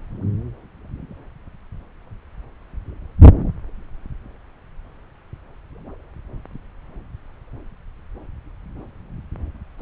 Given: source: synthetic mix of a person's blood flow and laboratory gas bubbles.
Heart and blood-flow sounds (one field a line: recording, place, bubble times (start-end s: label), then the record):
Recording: Doppler ultrasound of blood flow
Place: subclavian vein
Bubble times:
9.79-9.82 s: bubbles
From the record:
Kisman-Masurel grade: 212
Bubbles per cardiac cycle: several, 3 to 8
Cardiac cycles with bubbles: 1 to 10%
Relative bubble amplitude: moderate (0.250 to 0.450)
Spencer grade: 1 (occasional bubble signal discernible with the cardiac motion signal, with majority of cardiac periods free of bubbles)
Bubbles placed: anywhere in the cardiac cycle